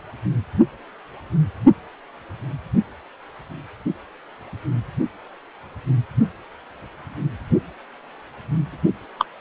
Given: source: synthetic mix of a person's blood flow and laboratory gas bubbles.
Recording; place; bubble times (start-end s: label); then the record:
Doppler ultrasound of blood flow; precordium
9.18-9.25 s: bubbles
From the record:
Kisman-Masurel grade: 112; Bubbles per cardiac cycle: 1 to 2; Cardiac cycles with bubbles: 1 to 10%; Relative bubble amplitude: moderate (0.250 to 0.450); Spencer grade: 1 (occasional bubble signal discernible with the cardiac motion signal, with majority of cardiac periods free of bubbles); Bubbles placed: only in the low amplitude regions of the cardiac cycle